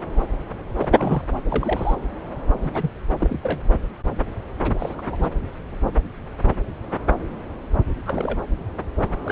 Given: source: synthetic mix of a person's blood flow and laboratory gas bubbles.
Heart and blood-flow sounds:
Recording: Doppler ultrasound of blood flow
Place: subclavian vein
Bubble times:
0.78-1.24 s: bubbles
1.49-1.95 s: bubbles
2.61-2.92 s: bubbles
3.19-3.40 s: bubbles
3.43-3.60 s: bubbles
4.79-4.95 s: bubbles
4.97-5.02 s: bubbles
5.12-5.28 s: bubbles
8.05-8.46 s: bubbles
9.25-9.32 s: bubbles
From the record:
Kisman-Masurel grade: 221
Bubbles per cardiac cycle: several, 3 to 8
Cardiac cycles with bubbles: 10 to 50%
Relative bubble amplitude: barely perceptible (0.100 to 0.250)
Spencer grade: 2 (many but less than half of the cardiac periods contain bubble signals, singularly or in groups)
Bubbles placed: anywhere in the cardiac cycle

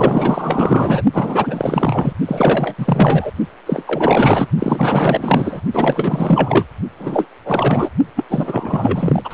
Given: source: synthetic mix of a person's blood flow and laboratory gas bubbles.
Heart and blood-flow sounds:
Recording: Doppler ultrasound of blood flow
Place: precordium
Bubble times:
0.00-1.03 s: bubbles
1.13-2.14 s: bubbles
2.27-2.74 s: bubbles
2.78-3.31 s: bubbles
3.66-3.84 s: bubbles
3.87-4.48 s: bubbles
4.58-5.61 s: bubbles
5.74-6.65 s: bubbles
6.99-7.28 s: bubbles
7.45-7.89 s: bubbles
8.16-8.24 s: bubbles
8.29-9.21 s: bubbles
9.24-9.34 s: bubbles
From the record:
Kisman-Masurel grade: 444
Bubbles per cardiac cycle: continuous sound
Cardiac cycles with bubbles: 100%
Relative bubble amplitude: maximal (0.775 to 0.999)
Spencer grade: 4 (maximum detectable bubble signal sounding continuously throughout systole and diastole of every cardiac period, and overriding the amplitude of the normal cardiac signals)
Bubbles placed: only in the low amplitude regions of the cardiac cycle

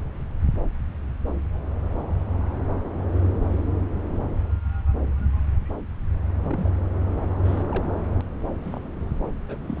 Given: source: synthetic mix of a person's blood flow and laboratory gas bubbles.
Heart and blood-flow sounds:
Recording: Doppler ultrasound of blood flow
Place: subclavian vein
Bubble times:
6.41-6.69 s: bubbles
7.44-7.63 s: bubbles
7.71-7.89 s: bubbles
8.63-8.79 s: bubbles
9.48-9.56 s: bubbles
9.67-9.80 s: bubbles
From the record:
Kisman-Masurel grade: 121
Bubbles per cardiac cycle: 1 to 2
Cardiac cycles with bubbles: 10 to 50%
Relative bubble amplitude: barely perceptible (0.100 to 0.250)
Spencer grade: 2 (many but less than half of the cardiac periods contain bubble signals, singularly or in groups)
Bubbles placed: anywhere in the cardiac cycle

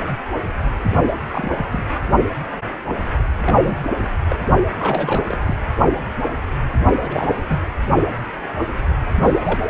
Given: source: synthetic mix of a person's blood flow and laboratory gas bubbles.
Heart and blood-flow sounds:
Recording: Doppler ultrasound of blood flow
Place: precordium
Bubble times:
1.29-1.66 s: bubbles
1.71-1.83 s: bubbles
3.44-3.59 s: bubbles
3.63-3.79 s: bubbles
3.98-4.08 s: bubbles
4.29-4.37 s: bubbles
4.79-5.38 s: bubbles
5.46-5.55 s: bubbles
7.03-7.42 s: bubbles
7.47-7.60 s: bubbles
9.23-9.59 s: bubbles
From the record:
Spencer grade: 2 (many but less than half of the cardiac periods contain bubble signals, singularly or in groups)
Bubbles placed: only in the low amplitude regions of the cardiac cycle

